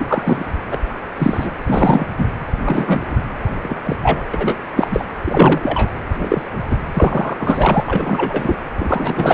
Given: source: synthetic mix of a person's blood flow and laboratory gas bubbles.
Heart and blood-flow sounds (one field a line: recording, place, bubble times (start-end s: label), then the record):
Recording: Doppler ultrasound of blood flow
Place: precordium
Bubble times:
0.00-0.45 s: bubbles
0.71-0.78 s: bubbles
1.19-1.55 s: bubbles
1.67-2.05 s: bubbles
2.18-2.26 s: bubbles
2.65-3.15 s: bubbles
3.62-3.77 s: bubbles
3.85-3.96 s: bubbles
4.02-4.23 s: bubbles
4.33-4.58 s: bubbles
4.75-4.88 s: bubbles
4.91-5.06 s: bubbles
5.25-5.91 s: bubbles
6.19-6.42 s: bubbles
6.69-6.77 s: bubbles
6.93-7.37 s: bubbles
7.39-7.83 s: bubbles
7.85-8.56 s: bubbles
8.77-9.34 s: bubbles
From the record:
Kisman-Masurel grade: 243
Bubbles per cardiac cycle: several, 3 to 8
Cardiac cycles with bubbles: 100%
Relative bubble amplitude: loud (0.450 to 0.775)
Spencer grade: 3 (all of the cardiac periods contain showers or single bubble signals, but not dominating or overriding the cardiac motion signals)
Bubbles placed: anywhere in the cardiac cycle